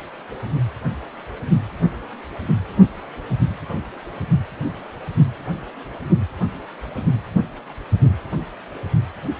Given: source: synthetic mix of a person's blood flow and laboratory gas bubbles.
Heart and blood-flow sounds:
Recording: Doppler ultrasound of blood flow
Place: precordium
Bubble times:
no bubbles
From the record:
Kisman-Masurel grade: 000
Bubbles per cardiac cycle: 0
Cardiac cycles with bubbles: 0%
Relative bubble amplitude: no bubbles discernible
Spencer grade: 0 (complete lack of bubble signals)

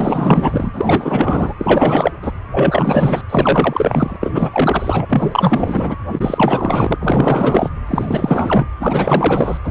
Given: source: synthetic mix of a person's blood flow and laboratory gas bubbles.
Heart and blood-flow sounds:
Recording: Doppler ultrasound of blood flow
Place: precordium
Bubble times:
0.00-0.70 s: bubbles
0.73-1.54 s: bubbles
1.58-2.11 s: bubbles
2.22-2.31 s: bubbles
2.51-3.22 s: bubbles
3.29-4.17 s: bubbles
4.21-5.96 s: bubbles
6.11-6.96 s: bubbles
6.99-7.70 s: bubbles
7.87-8.68 s: bubbles
8.80-9.58 s: bubbles
9.64-9.71 s: bubbles
From the record:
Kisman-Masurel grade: 444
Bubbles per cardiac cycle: continuous sound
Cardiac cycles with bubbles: 100%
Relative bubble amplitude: maximal (0.775 to 0.999)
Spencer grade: 4 (maximum detectable bubble signal sounding continuously throughout systole and diastole of every cardiac period, and overriding the amplitude of the normal cardiac signals)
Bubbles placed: anywhere in the cardiac cycle

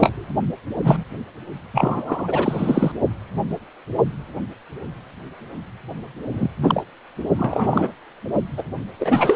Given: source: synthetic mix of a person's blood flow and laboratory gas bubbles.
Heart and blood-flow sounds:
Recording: Doppler ultrasound of blood flow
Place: precordium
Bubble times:
0.00-0.24 s: bubbles
0.83-1.04 s: bubbles
1.74-2.92 s: bubbles
6.32-6.49 s: bubbles
6.62-6.84 s: bubbles
7.38-7.92 s: bubbles
8.58-8.63 s: bubbles
8.99-9.36 s: bubbles
From the record:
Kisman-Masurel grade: 233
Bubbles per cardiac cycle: several, 3 to 8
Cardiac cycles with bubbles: 50 to 99%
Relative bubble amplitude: loud (0.450 to 0.775)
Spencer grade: 3 (all of the cardiac periods contain showers or single bubble signals, but not dominating or overriding the cardiac motion signals)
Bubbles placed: only in the low amplitude regions of the cardiac cycle

